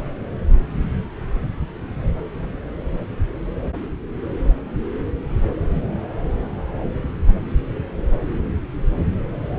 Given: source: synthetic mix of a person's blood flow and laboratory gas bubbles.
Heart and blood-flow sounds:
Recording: Doppler ultrasound of blood flow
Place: subclavian vein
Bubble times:
no bubbles
From the record:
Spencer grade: 0 (complete lack of bubble signals)

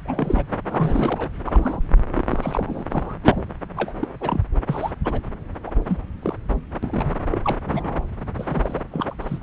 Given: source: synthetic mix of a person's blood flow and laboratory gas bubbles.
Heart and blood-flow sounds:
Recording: Doppler ultrasound of blood flow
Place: subclavian vein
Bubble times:
0.05-0.47 s: bubbles
0.70-1.30 s: bubbles
1.46-1.81 s: bubbles
2.15-2.25 s: bubbles
2.29-2.84 s: bubbles
2.90-3.15 s: bubbles
3.23-3.42 s: bubbles
3.76-3.92 s: bubbles
4.01-4.08 s: bubbles
4.21-4.41 s: bubbles
4.66-4.91 s: bubbles
5.04-5.20 s: bubbles
5.67-5.71 s: bubbles
5.87-6.04 s: bubbles
6.22-6.35 s: bubbles
6.83-7.16 s: bubbles
7.31-7.56 s: bubbles
7.65-8.04 s: bubbles
8.35-8.82 s: bubbles
8.91-9.15 s: bubbles
9.21-9.39 s: bubbles
From the record:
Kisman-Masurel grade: 242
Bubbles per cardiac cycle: several, 3 to 8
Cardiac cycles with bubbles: 100%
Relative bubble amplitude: moderate (0.250 to 0.450)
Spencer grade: 3 (all of the cardiac periods contain showers or single bubble signals, but not dominating or overriding the cardiac motion signals)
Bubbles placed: anywhere in the cardiac cycle

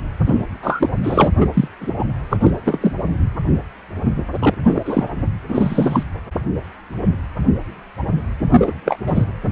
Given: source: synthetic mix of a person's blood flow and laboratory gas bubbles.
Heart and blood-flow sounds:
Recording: Doppler ultrasound of blood flow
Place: precordium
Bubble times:
0.25-0.43 s: bubbles
0.62-0.90 s: bubbles
1.03-1.28 s: bubbles
1.40-1.47 s: bubbles
1.53-1.68 s: bubbles
1.81-1.94 s: bubbles
1.99-2.06 s: bubbles
2.29-2.37 s: bubbles
2.40-2.51 s: bubbles
2.65-2.92 s: bubbles
4.39-4.54 s: bubbles
4.63-5.04 s: bubbles
5.49-6.04 s: bubbles
8.50-8.73 s: bubbles
8.85-8.97 s: bubbles
9.06-9.25 s: bubbles
From the record:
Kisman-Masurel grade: 233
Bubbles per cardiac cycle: several, 3 to 8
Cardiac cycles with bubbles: 50 to 99%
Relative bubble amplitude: loud (0.450 to 0.775)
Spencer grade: 3 (all of the cardiac periods contain showers or single bubble signals, but not dominating or overriding the cardiac motion signals)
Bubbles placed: anywhere in the cardiac cycle

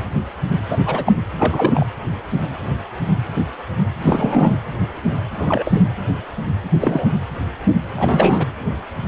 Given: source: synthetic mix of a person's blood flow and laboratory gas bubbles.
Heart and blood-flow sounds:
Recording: Doppler ultrasound of blood flow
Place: precordium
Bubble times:
0.69-0.77 s: bubbles
0.85-1.12 s: bubbles
1.37-1.85 s: bubbles
4.02-4.58 s: bubbles
5.37-5.83 s: bubbles
6.80-7.06 s: bubbles
7.96-8.45 s: bubbles
From the record:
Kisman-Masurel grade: 223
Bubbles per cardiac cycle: several, 3 to 8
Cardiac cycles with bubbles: 10 to 50%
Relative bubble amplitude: loud (0.450 to 0.775)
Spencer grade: 2 (many but less than half of the cardiac periods contain bubble signals, singularly or in groups)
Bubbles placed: anywhere in the cardiac cycle

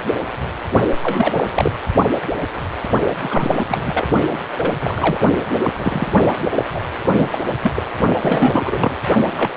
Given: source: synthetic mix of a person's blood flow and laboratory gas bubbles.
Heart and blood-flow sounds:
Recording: Doppler ultrasound of blood flow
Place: precordium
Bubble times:
1.03-1.52 s: bubbles
1.55-1.71 s: bubbles
3.21-3.65 s: bubbles
3.68-3.82 s: bubbles
3.85-4.07 s: bubbles
4.32-4.38 s: bubbles
4.57-4.76 s: bubbles
4.81-5.25 s: bubbles
5.50-6.07 s: bubbles
6.39-6.50 s: bubbles
6.54-6.65 s: bubbles
6.74-6.85 s: bubbles
7.16-7.29 s: bubbles
7.32-7.44 s: bubbles
7.62-7.71 s: bubbles
7.76-7.83 s: bubbles
8.21-8.97 s: bubbles
9.35-9.50 s: bubbles
From the record:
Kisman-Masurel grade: 332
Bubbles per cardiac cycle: rolling drumbeat, 9 or more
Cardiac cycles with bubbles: 50 to 99%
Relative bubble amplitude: moderate (0.250 to 0.450)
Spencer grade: 3 (all of the cardiac periods contain showers or single bubble signals, but not dominating or overriding the cardiac motion signals)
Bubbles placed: only in the low amplitude regions of the cardiac cycle

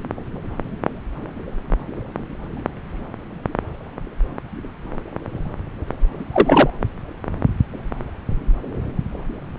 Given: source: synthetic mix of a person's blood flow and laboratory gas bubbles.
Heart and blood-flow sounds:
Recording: Doppler ultrasound of blood flow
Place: subclavian vein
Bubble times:
6.33-6.70 s: bubbles
From the record:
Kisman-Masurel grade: 213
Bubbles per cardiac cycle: several, 3 to 8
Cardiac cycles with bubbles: 1 to 10%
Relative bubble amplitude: loud (0.450 to 0.775)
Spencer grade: 1 (occasional bubble signal discernible with the cardiac motion signal, with majority of cardiac periods free of bubbles)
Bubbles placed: anywhere in the cardiac cycle

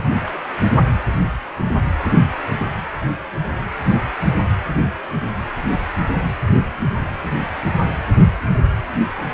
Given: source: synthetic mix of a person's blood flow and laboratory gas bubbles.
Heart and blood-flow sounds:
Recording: Doppler ultrasound of blood flow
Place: precordium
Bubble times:
0.00-0.04 s: bubbles
0.27-0.39 s: bubbles
From the record:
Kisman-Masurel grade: 211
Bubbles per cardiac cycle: several, 3 to 8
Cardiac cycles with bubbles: 1 to 10%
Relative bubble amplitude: barely perceptible (0.100 to 0.250)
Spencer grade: 1 (occasional bubble signal discernible with the cardiac motion signal, with majority of cardiac periods free of bubbles)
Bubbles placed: anywhere in the cardiac cycle

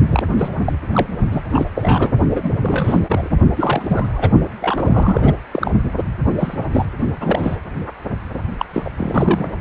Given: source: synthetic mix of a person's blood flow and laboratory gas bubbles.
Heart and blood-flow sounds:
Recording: Doppler ultrasound of blood flow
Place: precordium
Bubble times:
0.08-0.72 s: bubbles
0.93-1.06 s: bubbles
1.30-1.43 s: bubbles
1.50-1.65 s: bubbles
1.75-2.11 s: bubbles
2.33-2.50 s: bubbles
2.61-3.00 s: bubbles
3.08-3.29 s: bubbles
3.56-4.30 s: bubbles
4.61-5.33 s: bubbles
5.51-5.71 s: bubbles
6.38-6.58 s: bubbles
6.71-6.85 s: bubbles
7.20-7.56 s: bubbles
8.58-8.66 s: bubbles
8.73-8.83 s: bubbles
8.85-8.91 s: bubbles
8.97-9.46 s: bubbles
From the record:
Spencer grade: 3 (all of the cardiac periods contain showers or single bubble signals, but not dominating or overriding the cardiac motion signals)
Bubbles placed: only in the low amplitude regions of the cardiac cycle

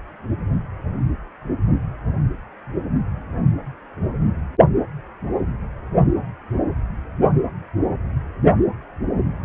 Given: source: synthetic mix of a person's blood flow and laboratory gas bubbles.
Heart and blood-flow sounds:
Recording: Doppler ultrasound of blood flow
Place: precordium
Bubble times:
no bubbles
From the record:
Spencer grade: 0 (complete lack of bubble signals)

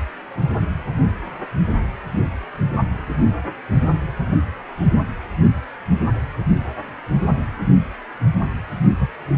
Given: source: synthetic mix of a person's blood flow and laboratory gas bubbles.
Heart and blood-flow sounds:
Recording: Doppler ultrasound of blood flow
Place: precordium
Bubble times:
9.00-9.07 s: bubbles
From the record:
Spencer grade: 1 (occasional bubble signal discernible with the cardiac motion signal, with majority of cardiac periods free of bubbles)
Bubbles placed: only in the low amplitude regions of the cardiac cycle

